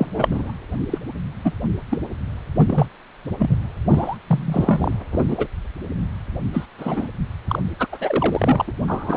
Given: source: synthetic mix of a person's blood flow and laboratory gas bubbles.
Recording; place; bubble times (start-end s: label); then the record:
Doppler ultrasound of blood flow; precordium
0.00-0.52 s: bubbles
0.91-0.99 s: bubbles
1.44-1.52 s: bubbles
1.90-1.99 s: bubbles
2.55-2.86 s: bubbles
3.39-3.55 s: bubbles
3.91-4.17 s: bubbles
4.26-4.94 s: bubbles
5.12-5.23 s: bubbles
5.27-5.47 s: bubbles
6.53-6.66 s: bubbles
6.78-7.08 s: bubbles
7.47-7.59 s: bubbles
7.79-7.87 s: bubbles
7.92-8.72 s: bubbles
8.88-9.17 s: bubbles
From the record:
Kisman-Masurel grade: 242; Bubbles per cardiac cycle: several, 3 to 8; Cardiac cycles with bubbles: 100%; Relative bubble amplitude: moderate (0.250 to 0.450); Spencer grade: 3 (all of the cardiac periods contain showers or single bubble signals, but not dominating or overriding the cardiac motion signals); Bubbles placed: anywhere in the cardiac cycle